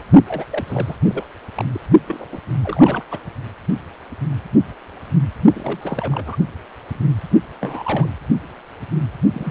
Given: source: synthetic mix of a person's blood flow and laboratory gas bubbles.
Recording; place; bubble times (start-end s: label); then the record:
Doppler ultrasound of blood flow; precordium
0.00-0.04 s: bubbles
0.27-0.45 s: bubbles
0.51-0.97 s: bubbles
1.02-1.24 s: bubbles
1.55-1.65 s: bubbles
1.73-1.80 s: bubbles
2.07-2.26 s: bubbles
2.31-2.40 s: bubbles
2.62-3.03 s: bubbles
3.11-3.19 s: bubbles
5.54-6.37 s: bubbles
7.61-8.06 s: bubbles
9.34-9.50 s: bubbles
From the record:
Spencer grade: 3 (all of the cardiac periods contain showers or single bubble signals, but not dominating or overriding the cardiac motion signals); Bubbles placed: only in the low amplitude regions of the cardiac cycle